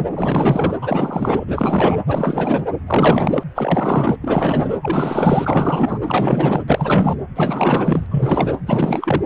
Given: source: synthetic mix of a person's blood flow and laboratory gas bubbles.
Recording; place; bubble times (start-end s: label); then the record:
Doppler ultrasound of blood flow; precordium
0.00-0.06 s: bubbles
0.15-0.76 s: bubbles
0.81-1.45 s: bubbles
1.47-2.01 s: bubbles
2.06-2.63 s: bubbles
2.87-3.43 s: bubbles
3.55-4.17 s: bubbles
4.21-4.75 s: bubbles
4.83-5.97 s: bubbles
6.05-6.61 s: bubbles
6.68-7.15 s: bubbles
7.35-8.08 s: bubbles
8.11-8.58 s: bubbles
8.66-9.26 s: bubbles
From the record:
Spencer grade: 4 (maximum detectable bubble signal sounding continuously throughout systole and diastole of every cardiac period, and overriding the amplitude of the normal cardiac signals); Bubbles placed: anywhere in the cardiac cycle